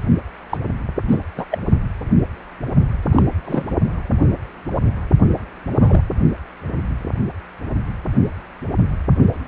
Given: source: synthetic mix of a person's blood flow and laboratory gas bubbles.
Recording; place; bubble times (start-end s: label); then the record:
Doppler ultrasound of blood flow; precordium
0.49-0.57 s: bubbles
1.09-1.18 s: bubbles
1.37-1.45 s: bubbles
1.50-1.59 s: bubbles
3.12-3.23 s: bubbles
3.45-3.67 s: bubbles
5.79-6.01 s: bubbles
From the record:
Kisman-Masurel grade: 222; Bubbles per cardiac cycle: several, 3 to 8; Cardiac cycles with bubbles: 10 to 50%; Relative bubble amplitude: moderate (0.250 to 0.450); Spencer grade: 2 (many but less than half of the cardiac periods contain bubble signals, singularly or in groups); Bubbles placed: only in the low amplitude regions of the cardiac cycle